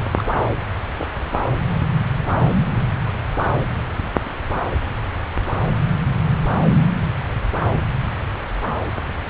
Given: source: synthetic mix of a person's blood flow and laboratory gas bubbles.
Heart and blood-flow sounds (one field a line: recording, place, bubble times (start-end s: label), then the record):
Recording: Doppler ultrasound of blood flow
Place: subclavian vein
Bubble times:
0.16-0.39 s: bubbles
0.96-1.08 s: bubbles
From the record:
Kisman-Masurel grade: 111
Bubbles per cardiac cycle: 1 to 2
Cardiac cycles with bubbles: 1 to 10%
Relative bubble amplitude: barely perceptible (0.100 to 0.250)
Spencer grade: 1 (occasional bubble signal discernible with the cardiac motion signal, with majority of cardiac periods free of bubbles)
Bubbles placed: anywhere in the cardiac cycle